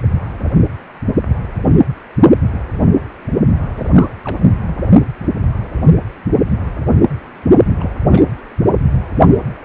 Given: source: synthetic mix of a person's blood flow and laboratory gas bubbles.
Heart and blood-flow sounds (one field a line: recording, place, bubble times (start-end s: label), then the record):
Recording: Doppler ultrasound of blood flow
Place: precordium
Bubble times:
3.77-3.90 s: bubbles
3.95-4.10 s: bubbles
4.24-4.39 s: bubbles
4.67-4.75 s: bubbles
7.65-7.75 s: bubbles
7.80-7.89 s: bubbles
8.10-8.24 s: bubbles
From the record:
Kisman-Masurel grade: 222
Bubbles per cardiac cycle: several, 3 to 8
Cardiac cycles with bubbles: 10 to 50%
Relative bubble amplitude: moderate (0.250 to 0.450)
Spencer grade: 2 (many but less than half of the cardiac periods contain bubble signals, singularly or in groups)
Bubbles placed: only in the low amplitude regions of the cardiac cycle